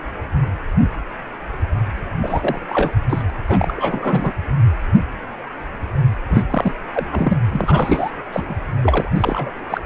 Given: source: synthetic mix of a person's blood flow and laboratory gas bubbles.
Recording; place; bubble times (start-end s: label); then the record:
Doppler ultrasound of blood flow; precordium
2.22-2.60 s: bubbles
2.69-2.93 s: bubbles
3.09-3.23 s: bubbles
3.28-3.31 s: bubbles
3.47-4.32 s: bubbles
6.30-6.44 s: bubbles
6.50-6.72 s: bubbles
6.92-7.07 s: bubbles
7.12-7.38 s: bubbles
7.52-8.11 s: bubbles
8.32-8.55 s: bubbles
8.81-9.09 s: bubbles
9.15-9.51 s: bubbles
9.69-9.80 s: bubbles
From the record:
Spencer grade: 3 (all of the cardiac periods contain showers or single bubble signals, but not dominating or overriding the cardiac motion signals); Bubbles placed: anywhere in the cardiac cycle